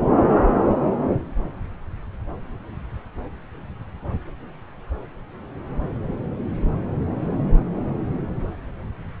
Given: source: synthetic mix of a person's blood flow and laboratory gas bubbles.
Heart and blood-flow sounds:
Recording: Doppler ultrasound of blood flow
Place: subclavian vein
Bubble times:
no bubbles
From the record:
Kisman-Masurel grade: 000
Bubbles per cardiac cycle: 0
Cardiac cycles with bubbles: 0%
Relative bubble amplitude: no bubbles discernible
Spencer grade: 0 (complete lack of bubble signals)

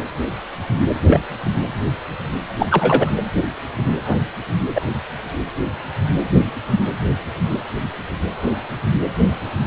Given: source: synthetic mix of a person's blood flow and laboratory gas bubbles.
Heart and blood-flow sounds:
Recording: Doppler ultrasound of blood flow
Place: precordium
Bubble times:
1.07-1.21 s: bubbles
2.58-2.67 s: bubbles
2.70-3.11 s: bubbles
4.06-4.18 s: bubbles
4.75-4.81 s: bubbles
From the record:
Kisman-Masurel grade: 123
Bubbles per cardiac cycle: 1 to 2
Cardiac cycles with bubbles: 10 to 50%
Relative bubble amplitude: loud (0.450 to 0.775)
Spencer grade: 2 (many but less than half of the cardiac periods contain bubble signals, singularly or in groups)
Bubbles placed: anywhere in the cardiac cycle

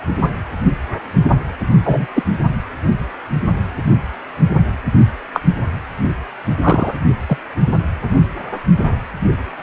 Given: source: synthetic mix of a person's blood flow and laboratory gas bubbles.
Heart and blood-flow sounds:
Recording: Doppler ultrasound of blood flow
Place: precordium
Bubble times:
1.83-2.06 s: bubbles
2.14-2.23 s: bubbles
5.33-5.40 s: bubbles
6.62-6.94 s: bubbles
7.27-7.37 s: bubbles
From the record:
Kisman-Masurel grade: 123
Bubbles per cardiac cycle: 1 to 2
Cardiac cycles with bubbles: 10 to 50%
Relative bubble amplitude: loud (0.450 to 0.775)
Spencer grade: 2 (many but less than half of the cardiac periods contain bubble signals, singularly or in groups)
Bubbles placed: only in the low amplitude regions of the cardiac cycle

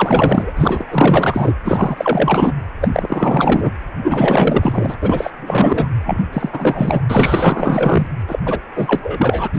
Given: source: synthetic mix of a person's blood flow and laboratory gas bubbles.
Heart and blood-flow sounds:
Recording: Doppler ultrasound of blood flow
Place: precordium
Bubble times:
0.00-1.56 s: bubbles
1.64-2.53 s: bubbles
2.80-2.88 s: bubbles
2.92-3.71 s: bubbles
4.04-4.96 s: bubbles
5.01-5.30 s: bubbles
5.37-5.90 s: bubbles
6.05-6.21 s: bubbles
6.33-7.02 s: bubbles
7.09-8.07 s: bubbles
8.28-8.39 s: bubbles
8.45-8.60 s: bubbles
8.75-9.48 s: bubbles
9.53-9.59 s: bubbles
From the record:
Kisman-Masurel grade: 444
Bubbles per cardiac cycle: continuous sound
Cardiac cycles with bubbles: 100%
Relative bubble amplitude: maximal (0.775 to 0.999)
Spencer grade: 4 (maximum detectable bubble signal sounding continuously throughout systole and diastole of every cardiac period, and overriding the amplitude of the normal cardiac signals)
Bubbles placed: anywhere in the cardiac cycle

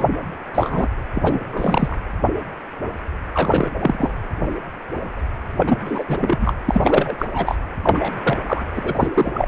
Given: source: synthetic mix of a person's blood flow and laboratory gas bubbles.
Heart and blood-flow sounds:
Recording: Doppler ultrasound of blood flow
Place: precordium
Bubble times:
0.00-0.04 s: bubbles
0.54-0.88 s: bubbles
1.14-1.41 s: bubbles
1.46-1.98 s: bubbles
3.34-3.69 s: bubbles
3.79-4.10 s: bubbles
5.58-5.78 s: bubbles
5.84-6.04 s: bubbles
6.08-6.53 s: bubbles
6.65-7.57 s: bubbles
7.83-8.13 s: bubbles
8.24-8.38 s: bubbles
8.46-8.63 s: bubbles
8.76-9.08 s: bubbles
9.14-9.48 s: bubbles
From the record:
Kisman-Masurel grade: 233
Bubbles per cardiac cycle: several, 3 to 8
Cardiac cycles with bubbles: 50 to 99%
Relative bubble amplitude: loud (0.450 to 0.775)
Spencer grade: 3 (all of the cardiac periods contain showers or single bubble signals, but not dominating or overriding the cardiac motion signals)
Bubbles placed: anywhere in the cardiac cycle

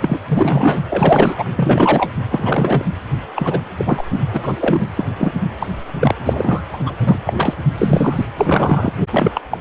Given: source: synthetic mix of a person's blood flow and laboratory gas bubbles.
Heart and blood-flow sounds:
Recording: Doppler ultrasound of blood flow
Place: precordium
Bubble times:
0.01-0.18 s: bubbles
0.28-0.80 s: bubbles
0.89-1.45 s: bubbles
1.55-2.12 s: bubbles
2.31-2.85 s: bubbles
3.35-3.60 s: bubbles
3.78-4.04 s: bubbles
4.32-4.91 s: bubbles
4.97-5.06 s: bubbles
5.17-5.32 s: bubbles
5.58-5.67 s: bubbles
5.99-6.14 s: bubbles
6.24-6.63 s: bubbles
6.73-6.78 s: bubbles
6.85-6.93 s: bubbles
7.06-7.18 s: bubbles
7.24-7.33 s: bubbles
7.37-7.54 s: bubbles
7.76-8.25 s: bubbles
8.37-8.92 s: bubbles
9.10-9.31 s: bubbles
9.34-9.41 s: bubbles
9.51-9.58 s: bubbles
From the record:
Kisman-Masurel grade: 243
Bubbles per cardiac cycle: several, 3 to 8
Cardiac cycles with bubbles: 100%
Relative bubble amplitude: loud (0.450 to 0.775)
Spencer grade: 3 (all of the cardiac periods contain showers or single bubble signals, but not dominating or overriding the cardiac motion signals)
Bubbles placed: anywhere in the cardiac cycle

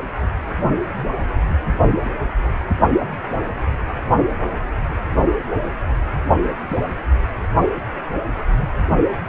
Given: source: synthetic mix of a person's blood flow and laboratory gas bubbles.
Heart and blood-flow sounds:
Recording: Doppler ultrasound of blood flow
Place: precordium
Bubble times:
6.67-6.84 s: bubbles
From the record:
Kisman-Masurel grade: 111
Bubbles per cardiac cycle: 1 to 2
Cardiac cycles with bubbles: 1 to 10%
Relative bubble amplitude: barely perceptible (0.100 to 0.250)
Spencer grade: 1 (occasional bubble signal discernible with the cardiac motion signal, with majority of cardiac periods free of bubbles)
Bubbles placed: anywhere in the cardiac cycle

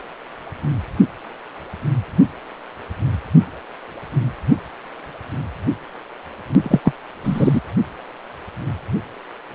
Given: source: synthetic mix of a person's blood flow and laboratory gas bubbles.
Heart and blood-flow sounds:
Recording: Doppler ultrasound of blood flow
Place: precordium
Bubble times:
6.62-6.79 s: bubbles
6.84-6.92 s: bubbles
7.24-7.61 s: bubbles
From the record:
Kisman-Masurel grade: 223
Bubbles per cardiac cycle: several, 3 to 8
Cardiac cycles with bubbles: 10 to 50%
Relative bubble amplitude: loud (0.450 to 0.775)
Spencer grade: 2 (many but less than half of the cardiac periods contain bubble signals, singularly or in groups)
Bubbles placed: only in the low amplitude regions of the cardiac cycle

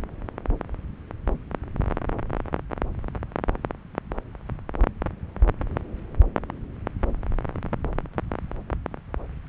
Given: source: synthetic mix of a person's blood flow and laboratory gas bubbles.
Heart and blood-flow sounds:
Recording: Doppler ultrasound of blood flow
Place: subclavian vein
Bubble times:
no bubbles
From the record:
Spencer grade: 0 (complete lack of bubble signals)

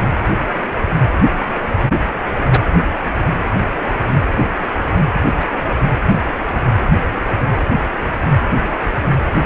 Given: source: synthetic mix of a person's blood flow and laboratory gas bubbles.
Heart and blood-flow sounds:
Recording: Doppler ultrasound of blood flow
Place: precordium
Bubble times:
5.41-5.45 s: bubbles
From the record:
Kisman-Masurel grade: 111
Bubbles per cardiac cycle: 1 to 2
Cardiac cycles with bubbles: 1 to 10%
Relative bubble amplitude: barely perceptible (0.100 to 0.250)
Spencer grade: 1 (occasional bubble signal discernible with the cardiac motion signal, with majority of cardiac periods free of bubbles)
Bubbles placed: anywhere in the cardiac cycle

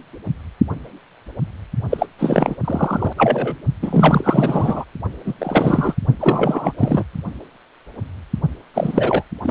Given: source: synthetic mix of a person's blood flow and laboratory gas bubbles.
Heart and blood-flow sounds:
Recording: Doppler ultrasound of blood flow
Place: precordium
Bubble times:
1.90-2.06 s: bubbles
2.18-2.55 s: bubbles
2.64-3.13 s: bubbles
3.17-3.55 s: bubbles
3.81-4.85 s: bubbles
5.25-5.34 s: bubbles
5.38-5.95 s: bubbles
6.19-6.73 s: bubbles
6.78-7.04 s: bubbles
8.74-9.23 s: bubbles
9.43-9.51 s: bubbles
From the record:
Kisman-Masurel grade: 333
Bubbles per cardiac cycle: rolling drumbeat, 9 or more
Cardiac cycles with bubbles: 50 to 99%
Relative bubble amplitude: loud (0.450 to 0.775)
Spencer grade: 3 (all of the cardiac periods contain showers or single bubble signals, but not dominating or overriding the cardiac motion signals)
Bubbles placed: only in the low amplitude regions of the cardiac cycle

